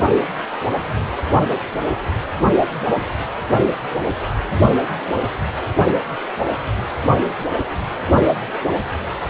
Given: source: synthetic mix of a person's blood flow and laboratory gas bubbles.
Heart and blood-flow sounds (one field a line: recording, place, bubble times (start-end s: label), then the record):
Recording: Doppler ultrasound of blood flow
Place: precordium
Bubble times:
no bubbles
From the record:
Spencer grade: 0 (complete lack of bubble signals)